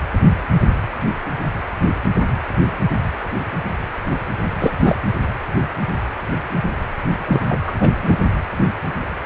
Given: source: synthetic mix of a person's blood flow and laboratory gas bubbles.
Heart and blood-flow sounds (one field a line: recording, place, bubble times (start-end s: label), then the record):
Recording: Doppler ultrasound of blood flow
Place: precordium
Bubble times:
4.59-4.72 s: bubbles
4.84-4.99 s: bubbles
7.27-7.40 s: bubbles
7.50-7.57 s: bubbles
7.67-7.72 s: bubbles
7.80-7.89 s: bubbles
8.02-8.17 s: bubbles
From the record:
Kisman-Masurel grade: 223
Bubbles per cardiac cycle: several, 3 to 8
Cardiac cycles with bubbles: 10 to 50%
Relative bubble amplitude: loud (0.450 to 0.775)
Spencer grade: 2 (many but less than half of the cardiac periods contain bubble signals, singularly or in groups)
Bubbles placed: anywhere in the cardiac cycle